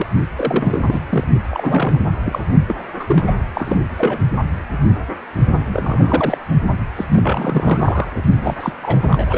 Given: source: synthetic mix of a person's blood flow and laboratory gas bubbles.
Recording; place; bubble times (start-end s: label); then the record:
Doppler ultrasound of blood flow; precordium
0.00-0.07 s: bubbles
0.36-1.00 s: bubbles
1.09-1.24 s: bubbles
1.50-2.09 s: bubbles
2.24-2.44 s: bubbles
2.68-2.75 s: bubbles
2.98-3.32 s: bubbles
3.54-3.77 s: bubbles
3.98-4.20 s: bubbles
5.67-6.38 s: bubbles
6.96-7.06 s: bubbles
7.10-8.21 s: bubbles
8.40-8.73 s: bubbles
8.82-9.07 s: bubbles
9.10-9.38 s: bubbles
From the record:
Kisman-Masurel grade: 332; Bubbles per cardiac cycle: rolling drumbeat, 9 or more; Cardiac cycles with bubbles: 50 to 99%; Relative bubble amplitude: moderate (0.250 to 0.450); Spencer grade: 3 (all of the cardiac periods contain showers or single bubble signals, but not dominating or overriding the cardiac motion signals); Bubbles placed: only in the low amplitude regions of the cardiac cycle